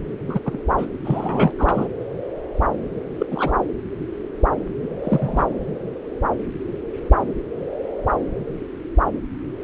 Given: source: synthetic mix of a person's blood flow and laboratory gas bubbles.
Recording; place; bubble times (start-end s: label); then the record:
Doppler ultrasound of blood flow; subclavian vein
0.27-0.40 s: bubbles
0.45-0.59 s: bubbles
0.77-0.86 s: bubbles
1.04-1.52 s: bubbles
1.58-1.90 s: bubbles
3.19-3.27 s: bubbles
3.31-3.52 s: bubbles
4.82-4.88 s: bubbles
5.04-5.46 s: bubbles
From the record:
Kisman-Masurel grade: 222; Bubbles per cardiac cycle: several, 3 to 8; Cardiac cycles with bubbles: 10 to 50%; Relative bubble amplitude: moderate (0.250 to 0.450); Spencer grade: 2 (many but less than half of the cardiac periods contain bubble signals, singularly or in groups); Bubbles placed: anywhere in the cardiac cycle